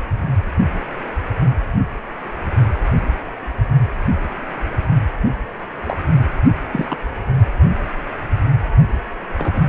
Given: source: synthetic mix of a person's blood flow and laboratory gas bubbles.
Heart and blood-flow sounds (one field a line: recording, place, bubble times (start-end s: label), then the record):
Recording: Doppler ultrasound of blood flow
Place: precordium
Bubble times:
5.85-5.97 s: bubbles
6.72-6.97 s: bubbles
9.37-9.65 s: bubbles
From the record:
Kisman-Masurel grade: 122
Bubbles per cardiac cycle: 1 to 2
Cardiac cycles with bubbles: 10 to 50%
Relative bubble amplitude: moderate (0.250 to 0.450)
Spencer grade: 2 (many but less than half of the cardiac periods contain bubble signals, singularly or in groups)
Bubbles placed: only in the low amplitude regions of the cardiac cycle